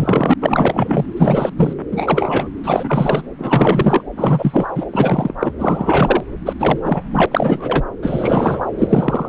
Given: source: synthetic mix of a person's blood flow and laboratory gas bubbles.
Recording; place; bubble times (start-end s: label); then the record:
Doppler ultrasound of blood flow; subclavian vein
0.00-0.34 s: bubbles
0.40-1.05 s: bubbles
1.16-1.49 s: bubbles
1.57-1.73 s: bubbles
1.91-2.48 s: bubbles
2.64-3.23 s: bubbles
3.39-4.03 s: bubbles
4.17-4.66 s: bubbles
4.75-4.86 s: bubbles
4.92-5.34 s: bubbles
5.40-5.52 s: bubbles
5.58-6.24 s: bubbles
6.46-6.53 s: bubbles
6.59-6.79 s: bubbles
6.83-7.03 s: bubbles
7.12-7.26 s: bubbles
7.31-7.84 s: bubbles
8.02-8.62 s: bubbles
8.78-9.28 s: bubbles
From the record:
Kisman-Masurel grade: 343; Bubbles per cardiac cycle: rolling drumbeat, 9 or more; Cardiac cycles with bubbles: 100%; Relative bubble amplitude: loud (0.450 to 0.775); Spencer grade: 3 (all of the cardiac periods contain showers or single bubble signals, but not dominating or overriding the cardiac motion signals); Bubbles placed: anywhere in the cardiac cycle